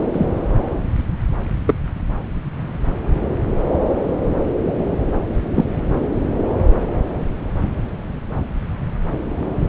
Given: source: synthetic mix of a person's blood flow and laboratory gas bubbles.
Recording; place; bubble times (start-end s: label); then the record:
Doppler ultrasound of blood flow; subclavian vein
0.12-0.29 s: bubbles
1.67-1.74 s: bubbles
5.54-5.65 s: bubbles
From the record:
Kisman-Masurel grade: 123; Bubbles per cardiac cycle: 1 to 2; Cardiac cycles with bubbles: 10 to 50%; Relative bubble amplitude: loud (0.450 to 0.775); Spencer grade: 2 (many but less than half of the cardiac periods contain bubble signals, singularly or in groups); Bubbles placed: anywhere in the cardiac cycle